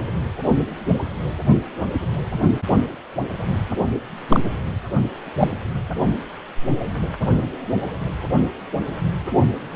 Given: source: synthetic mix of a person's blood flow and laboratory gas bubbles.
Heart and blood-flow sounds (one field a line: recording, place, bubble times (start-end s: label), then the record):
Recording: Doppler ultrasound of blood flow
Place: precordium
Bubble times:
4.28-4.40 s: bubbles
5.39-5.51 s: bubbles
From the record:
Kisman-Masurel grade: 123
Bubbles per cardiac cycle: 1 to 2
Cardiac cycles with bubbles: 10 to 50%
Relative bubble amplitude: loud (0.450 to 0.775)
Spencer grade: 2 (many but less than half of the cardiac periods contain bubble signals, singularly or in groups)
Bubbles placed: only in the low amplitude regions of the cardiac cycle